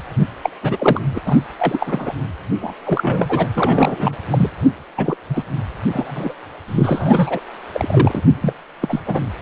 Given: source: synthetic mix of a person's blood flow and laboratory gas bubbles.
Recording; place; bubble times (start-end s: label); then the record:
Doppler ultrasound of blood flow; precordium
0.43-0.50 s: bubbles
0.62-0.99 s: bubbles
1.15-1.19 s: bubbles
1.25-1.39 s: bubbles
1.58-2.13 s: bubbles
2.60-2.73 s: bubbles
2.86-3.47 s: bubbles
3.55-4.17 s: bubbles
4.31-4.51 s: bubbles
4.97-5.17 s: bubbles
5.29-5.43 s: bubbles
5.92-6.34 s: bubbles
6.68-7.40 s: bubbles
7.74-8.22 s: bubbles
8.42-8.53 s: bubbles
8.81-9.00 s: bubbles
9.06-9.26 s: bubbles
From the record:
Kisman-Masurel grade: 342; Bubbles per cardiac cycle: rolling drumbeat, 9 or more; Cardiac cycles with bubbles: 100%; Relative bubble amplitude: moderate (0.250 to 0.450); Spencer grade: 3 (all of the cardiac periods contain showers or single bubble signals, but not dominating or overriding the cardiac motion signals); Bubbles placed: anywhere in the cardiac cycle